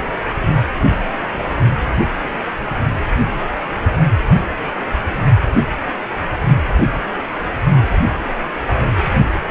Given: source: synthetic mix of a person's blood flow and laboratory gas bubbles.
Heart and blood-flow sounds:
Doppler ultrasound of blood flow; precordium
0.00-0.13 s: bubbles
0.89-1.11 s: bubbles
1.31-1.55 s: bubbles
From the record:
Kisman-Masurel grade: 221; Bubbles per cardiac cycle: several, 3 to 8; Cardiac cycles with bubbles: 10 to 50%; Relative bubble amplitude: barely perceptible (0.100 to 0.250); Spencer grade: 2 (many but less than half of the cardiac periods contain bubble signals, singularly or in groups); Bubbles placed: only in the low amplitude regions of the cardiac cycle

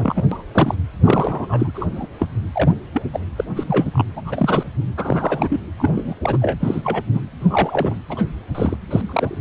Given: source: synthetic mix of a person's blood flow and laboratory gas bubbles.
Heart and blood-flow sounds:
Doppler ultrasound of blood flow; precordium
0.00-0.22 s: bubbles
0.32-0.43 s: bubbles
0.52-0.74 s: bubbles
1.04-1.71 s: bubbles
1.74-1.87 s: bubbles
1.96-2.08 s: bubbles
2.19-2.27 s: bubbles
2.53-2.74 s: bubbles
2.94-3.02 s: bubbles
3.13-3.20 s: bubbles
3.36-3.45 s: bubbles
3.56-3.64 s: bubbles
3.67-4.05 s: bubbles
4.16-4.64 s: bubbles
4.97-5.61 s: bubbles
5.76-6.14 s: bubbles
6.23-6.38 s: bubbles
6.42-6.58 s: bubbles
6.61-7.04 s: bubbles
7.13-7.21 s: bubbles
7.40-7.95 s: bubbles
8.09-8.25 s: bubbles
8.54-8.76 s: bubbles
8.90-9.01 s: bubbles
9.05-9.38 s: bubbles
From the record:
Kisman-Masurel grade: 242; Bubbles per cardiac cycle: several, 3 to 8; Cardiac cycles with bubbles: 100%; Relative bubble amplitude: moderate (0.250 to 0.450); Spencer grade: 3 (all of the cardiac periods contain showers or single bubble signals, but not dominating or overriding the cardiac motion signals); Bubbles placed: anywhere in the cardiac cycle

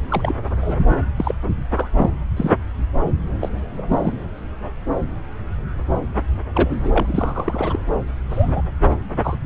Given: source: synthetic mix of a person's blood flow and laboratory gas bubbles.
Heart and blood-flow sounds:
Doppler ultrasound of blood flow; subclavian vein
0.08-0.35 s: bubbles
0.60-0.77 s: bubbles
1.16-1.35 s: bubbles
1.76-1.90 s: bubbles
1.96-2.10 s: bubbles
2.37-2.50 s: bubbles
3.40-3.49 s: bubbles
3.77-3.82 s: bubbles
3.88-4.24 s: bubbles
6.55-6.92 s: bubbles
6.96-7.79 s: bubbles
8.29-8.62 s: bubbles
9.23-9.37 s: bubbles
From the record:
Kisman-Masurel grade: 232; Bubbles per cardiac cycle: several, 3 to 8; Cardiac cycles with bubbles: 50 to 99%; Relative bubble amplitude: moderate (0.250 to 0.450); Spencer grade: 3 (all of the cardiac periods contain showers or single bubble signals, but not dominating or overriding the cardiac motion signals); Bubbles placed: anywhere in the cardiac cycle

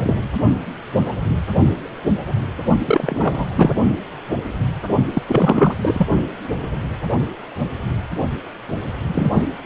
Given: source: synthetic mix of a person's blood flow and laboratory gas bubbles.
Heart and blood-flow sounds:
Doppler ultrasound of blood flow; precordium
0.00-0.15 s: bubbles
2.85-3.46 s: bubbles
3.56-3.73 s: bubbles
5.13-5.22 s: bubbles
5.27-5.74 s: bubbles
5.81-6.07 s: bubbles
9.13-9.46 s: bubbles
9.64-9.66 s: bubbles
From the record:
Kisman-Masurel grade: 333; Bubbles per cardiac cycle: rolling drumbeat, 9 or more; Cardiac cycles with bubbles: 50 to 99%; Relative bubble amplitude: loud (0.450 to 0.775); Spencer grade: 3 (all of the cardiac periods contain showers or single bubble signals, but not dominating or overriding the cardiac motion signals); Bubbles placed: only in the low amplitude regions of the cardiac cycle

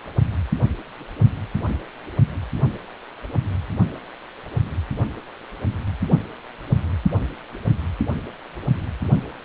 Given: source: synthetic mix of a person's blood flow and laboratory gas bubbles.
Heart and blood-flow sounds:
Doppler ultrasound of blood flow; precordium
no bubbles
From the record:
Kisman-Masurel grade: 000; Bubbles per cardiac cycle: 0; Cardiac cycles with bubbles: 0%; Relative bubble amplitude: no bubbles discernible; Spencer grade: 0 (complete lack of bubble signals)

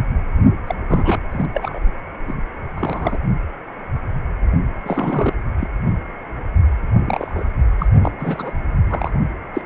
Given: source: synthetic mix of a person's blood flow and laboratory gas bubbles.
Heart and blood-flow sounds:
Doppler ultrasound of blood flow; precordium
0.66-0.75 s: bubbles
0.89-1.20 s: bubbles
1.32-1.46 s: bubbles
1.54-1.79 s: bubbles
2.27-2.33 s: bubbles
2.76-3.17 s: bubbles
4.84-5.33 s: bubbles
5.58-5.67 s: bubbles
7.05-7.44 s: bubbles
7.78-7.87 s: bubbles
8.04-8.12 s: bubbles
8.19-8.52 s: bubbles
8.89-9.11 s: bubbles
9.54-9.62 s: bubbles
From the record:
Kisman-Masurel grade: 232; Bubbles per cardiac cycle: several, 3 to 8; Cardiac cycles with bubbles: 50 to 99%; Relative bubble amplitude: moderate (0.250 to 0.450); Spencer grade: 3 (all of the cardiac periods contain showers or single bubble signals, but not dominating or overriding the cardiac motion signals); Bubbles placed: only in the low amplitude regions of the cardiac cycle

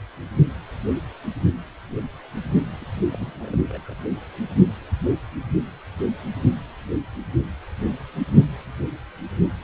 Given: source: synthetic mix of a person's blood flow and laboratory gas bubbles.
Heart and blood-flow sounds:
Doppler ultrasound of blood flow; precordium
2.81-2.85 s: bubbles
3.11-3.64 s: bubbles
3.69-3.94 s: bubbles
From the record:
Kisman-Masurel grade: 211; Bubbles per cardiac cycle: several, 3 to 8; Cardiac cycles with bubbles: 1 to 10%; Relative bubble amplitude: barely perceptible (0.100 to 0.250); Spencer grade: 1 (occasional bubble signal discernible with the cardiac motion signal, with majority of cardiac periods free of bubbles); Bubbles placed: anywhere in the cardiac cycle

